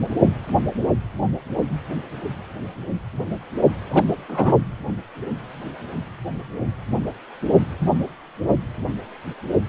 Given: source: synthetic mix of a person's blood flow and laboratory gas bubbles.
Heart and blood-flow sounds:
Doppler ultrasound of blood flow; precordium
3.90-4.03 s: bubbles
4.29-4.55 s: bubbles
From the record:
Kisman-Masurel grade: 113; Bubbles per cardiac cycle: 1 to 2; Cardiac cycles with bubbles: 1 to 10%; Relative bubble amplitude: loud (0.450 to 0.775); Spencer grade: 1 (occasional bubble signal discernible with the cardiac motion signal, with majority of cardiac periods free of bubbles); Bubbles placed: only in the low amplitude regions of the cardiac cycle

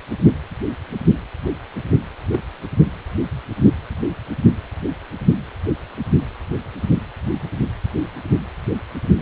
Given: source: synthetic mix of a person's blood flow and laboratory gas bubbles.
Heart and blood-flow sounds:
Doppler ultrasound of blood flow; precordium
2.28-2.42 s: bubbles
From the record:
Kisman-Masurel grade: 111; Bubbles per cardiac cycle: 1 to 2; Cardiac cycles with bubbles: 1 to 10%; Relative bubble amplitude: barely perceptible (0.100 to 0.250); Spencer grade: 1 (occasional bubble signal discernible with the cardiac motion signal, with majority of cardiac periods free of bubbles); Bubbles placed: anywhere in the cardiac cycle

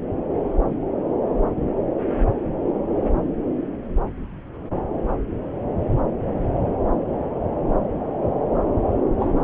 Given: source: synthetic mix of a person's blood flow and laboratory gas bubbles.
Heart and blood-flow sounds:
Doppler ultrasound of blood flow; subclavian vein
9.19-9.29 s: bubbles
From the record:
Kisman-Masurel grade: 112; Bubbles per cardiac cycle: 1 to 2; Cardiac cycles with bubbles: 1 to 10%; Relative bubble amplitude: moderate (0.250 to 0.450); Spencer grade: 1 (occasional bubble signal discernible with the cardiac motion signal, with majority of cardiac periods free of bubbles); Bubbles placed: anywhere in the cardiac cycle

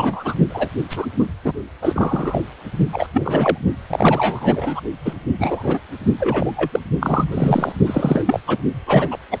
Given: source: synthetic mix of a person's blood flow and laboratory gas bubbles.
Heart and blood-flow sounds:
Doppler ultrasound of blood flow; precordium
0.00-0.36 s: bubbles
0.49-0.68 s: bubbles
0.90-1.06 s: bubbles
1.19-1.25 s: bubbles
1.44-1.52 s: bubbles
1.82-2.44 s: bubbles
2.92-3.06 s: bubbles
3.14-3.58 s: bubbles
3.90-4.80 s: bubbles
5.05-5.16 s: bubbles
5.38-5.79 s: bubbles
6.20-6.51 s: bubbles
6.56-6.79 s: bubbles
7.00-7.73 s: bubbles
7.86-8.22 s: bubbles
8.26-8.40 s: bubbles
8.47-8.57 s: bubbles
8.86-9.08 s: bubbles
9.11-9.17 s: bubbles
9.31-9.38 s: bubbles
From the record:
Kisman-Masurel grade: 243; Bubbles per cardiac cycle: several, 3 to 8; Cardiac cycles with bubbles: 100%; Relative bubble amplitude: loud (0.450 to 0.775); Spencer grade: 3 (all of the cardiac periods contain showers or single bubble signals, but not dominating or overriding the cardiac motion signals); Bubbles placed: only in the low amplitude regions of the cardiac cycle

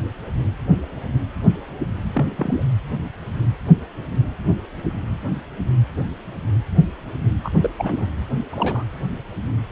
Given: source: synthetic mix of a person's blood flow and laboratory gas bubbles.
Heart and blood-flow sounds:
Doppler ultrasound of blood flow; precordium
2.14-2.26 s: bubbles
2.37-2.63 s: bubbles
7.44-7.51 s: bubbles
7.63-7.70 s: bubbles
7.78-7.94 s: bubbles
7.97-8.06 s: bubbles
8.51-8.83 s: bubbles
From the record:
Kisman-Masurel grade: 221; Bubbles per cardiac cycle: several, 3 to 8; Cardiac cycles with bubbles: 10 to 50%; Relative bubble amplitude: barely perceptible (0.100 to 0.250); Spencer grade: 2 (many but less than half of the cardiac periods contain bubble signals, singularly or in groups); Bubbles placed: anywhere in the cardiac cycle

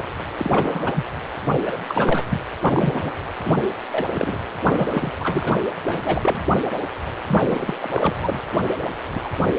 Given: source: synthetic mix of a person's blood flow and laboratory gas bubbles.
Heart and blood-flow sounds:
Doppler ultrasound of blood flow; precordium
0.38-1.05 s: bubbles
1.50-1.61 s: bubbles
1.65-1.77 s: bubbles
1.88-2.25 s: bubbles
2.30-2.40 s: bubbles
2.62-3.12 s: bubbles
3.44-3.61 s: bubbles
3.91-4.05 s: bubbles
4.14-4.38 s: bubbles
4.62-5.13 s: bubbles
5.20-5.52 s: bubbles
5.86-6.43 s: bubbles
7.26-7.74 s: bubbles
7.81-8.41 s: bubbles
9.12-9.22 s: bubbles
9.24-9.30 s: bubbles
From the record:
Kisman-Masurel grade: 333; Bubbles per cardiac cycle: rolling drumbeat, 9 or more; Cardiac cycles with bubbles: 50 to 99%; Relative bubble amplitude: loud (0.450 to 0.775); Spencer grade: 3 (all of the cardiac periods contain showers or single bubble signals, but not dominating or overriding the cardiac motion signals); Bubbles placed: anywhere in the cardiac cycle

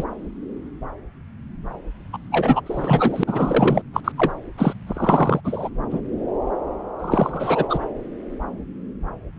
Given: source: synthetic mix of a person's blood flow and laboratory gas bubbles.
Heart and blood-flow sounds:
Doppler ultrasound of blood flow; subclavian vein
0.00-0.04 s: bubbles
2.12-2.18 s: bubbles
2.31-2.60 s: bubbles
2.66-3.23 s: bubbles
3.27-3.82 s: bubbles
3.93-4.00 s: bubbles
4.04-4.12 s: bubbles
4.17-4.32 s: bubbles
4.58-4.74 s: bubbles
4.87-5.41 s: bubbles
5.44-5.69 s: bubbles
5.90-6.00 s: bubbles
6.99-7.79 s: bubbles
From the record:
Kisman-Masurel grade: 333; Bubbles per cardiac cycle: rolling drumbeat, 9 or more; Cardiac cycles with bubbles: 50 to 99%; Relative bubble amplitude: loud (0.450 to 0.775); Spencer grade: 3 (all of the cardiac periods contain showers or single bubble signals, but not dominating or overriding the cardiac motion signals); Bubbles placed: anywhere in the cardiac cycle

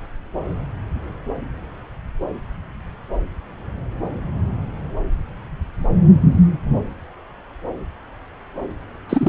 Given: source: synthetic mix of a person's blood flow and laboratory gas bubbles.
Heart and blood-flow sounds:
Doppler ultrasound of blood flow; subclavian vein
9.09-9.29 s: bubbles
From the record:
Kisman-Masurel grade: 213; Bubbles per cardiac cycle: several, 3 to 8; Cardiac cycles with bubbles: 1 to 10%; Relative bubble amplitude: loud (0.450 to 0.775); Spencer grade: 1 (occasional bubble signal discernible with the cardiac motion signal, with majority of cardiac periods free of bubbles); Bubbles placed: anywhere in the cardiac cycle

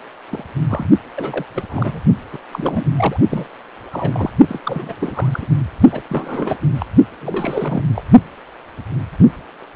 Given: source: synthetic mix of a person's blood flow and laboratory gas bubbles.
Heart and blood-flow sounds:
Doppler ultrasound of blood flow; precordium
0.31-0.44 s: bubbles
0.69-0.90 s: bubbles
1.16-1.45 s: bubbles
1.54-2.01 s: bubbles
2.33-2.38 s: bubbles
2.52-2.86 s: bubbles
2.97-3.20 s: bubbles
3.28-3.47 s: bubbles
3.92-4.30 s: bubbles
4.48-4.60 s: bubbles
4.65-4.96 s: bubbles
5.00-5.48 s: bubbles
5.92-6.02 s: bubbles
6.08-6.58 s: bubbles
6.75-6.86 s: bubbles
7.21-7.83 s: bubbles
7.95-8.04 s: bubbles
From the record:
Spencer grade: 3 (all of the cardiac periods contain showers or single bubble signals, but not dominating or overriding the cardiac motion signals); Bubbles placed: only in the low amplitude regions of the cardiac cycle

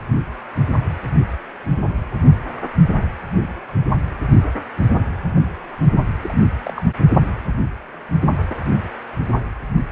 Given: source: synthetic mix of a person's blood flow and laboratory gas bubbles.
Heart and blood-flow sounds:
Doppler ultrasound of blood flow; precordium
6.21-6.38 s: bubbles
6.53-6.84 s: bubbles
From the record:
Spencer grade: 1 (occasional bubble signal discernible with the cardiac motion signal, with majority of cardiac periods free of bubbles); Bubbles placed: anywhere in the cardiac cycle

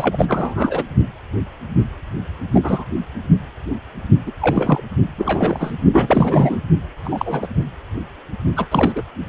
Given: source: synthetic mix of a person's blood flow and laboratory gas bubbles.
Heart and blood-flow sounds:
Doppler ultrasound of blood flow; precordium
0.00-0.84 s: bubbles
2.54-2.60 s: bubbles
2.63-2.84 s: bubbles
4.26-4.31 s: bubbles
4.41-4.82 s: bubbles
5.17-5.77 s: bubbles
5.92-6.62 s: bubbles
7.04-7.48 s: bubbles
8.56-8.68 s: bubbles
8.71-8.93 s: bubbles
8.96-9.03 s: bubbles
From the record:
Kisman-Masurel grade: 233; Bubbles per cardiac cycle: several, 3 to 8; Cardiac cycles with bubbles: 50 to 99%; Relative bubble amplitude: loud (0.450 to 0.775); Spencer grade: 3 (all of the cardiac periods contain showers or single bubble signals, but not dominating or overriding the cardiac motion signals); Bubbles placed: only in the low amplitude regions of the cardiac cycle

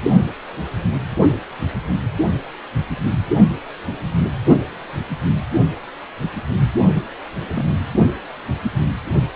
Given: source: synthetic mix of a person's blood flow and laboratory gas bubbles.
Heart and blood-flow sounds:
Doppler ultrasound of blood flow; precordium
7.50-7.64 s: bubbles
From the record:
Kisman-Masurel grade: 122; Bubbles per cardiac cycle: 1 to 2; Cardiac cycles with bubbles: 10 to 50%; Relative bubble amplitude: moderate (0.250 to 0.450); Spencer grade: 2 (many but less than half of the cardiac periods contain bubble signals, singularly or in groups); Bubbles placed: only in the low amplitude regions of the cardiac cycle

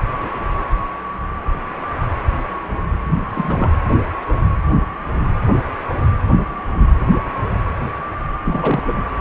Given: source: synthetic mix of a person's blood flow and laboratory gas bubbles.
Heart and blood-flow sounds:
Doppler ultrasound of blood flow; precordium
3.29-3.71 s: bubbles
8.46-9.02 s: bubbles
From the record:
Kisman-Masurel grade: 222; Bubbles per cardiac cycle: several, 3 to 8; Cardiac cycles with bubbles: 10 to 50%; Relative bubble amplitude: moderate (0.250 to 0.450); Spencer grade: 2 (many but less than half of the cardiac periods contain bubble signals, singularly or in groups); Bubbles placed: anywhere in the cardiac cycle

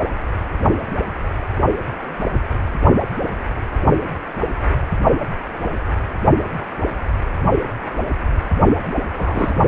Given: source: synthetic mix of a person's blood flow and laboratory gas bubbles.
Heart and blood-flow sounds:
Doppler ultrasound of blood flow; precordium
9.18-9.55 s: bubbles
From the record:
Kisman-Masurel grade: 212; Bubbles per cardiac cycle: several, 3 to 8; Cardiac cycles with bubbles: 1 to 10%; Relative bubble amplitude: moderate (0.250 to 0.450); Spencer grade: 1 (occasional bubble signal discernible with the cardiac motion signal, with majority of cardiac periods free of bubbles); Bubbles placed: only in the low amplitude regions of the cardiac cycle

